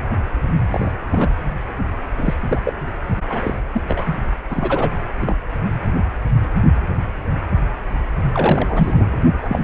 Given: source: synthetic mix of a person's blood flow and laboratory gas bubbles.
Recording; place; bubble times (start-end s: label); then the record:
Doppler ultrasound of blood flow; precordium
0.70-0.91 s: bubbles
1.11-1.29 s: bubbles
2.17-2.34 s: bubbles
2.48-2.60 s: bubbles
2.65-2.73 s: bubbles
3.29-3.54 s: bubbles
3.73-3.82 s: bubbles
3.88-4.18 s: bubbles
4.49-4.92 s: bubbles
5.20-5.35 s: bubbles
8.32-9.18 s: bubbles
9.41-9.64 s: bubbles
From the record:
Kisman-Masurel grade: 232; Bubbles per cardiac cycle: several, 3 to 8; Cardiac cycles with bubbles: 50 to 99%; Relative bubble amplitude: moderate (0.250 to 0.450); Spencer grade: 3 (all of the cardiac periods contain showers or single bubble signals, but not dominating or overriding the cardiac motion signals); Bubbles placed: only in the low amplitude regions of the cardiac cycle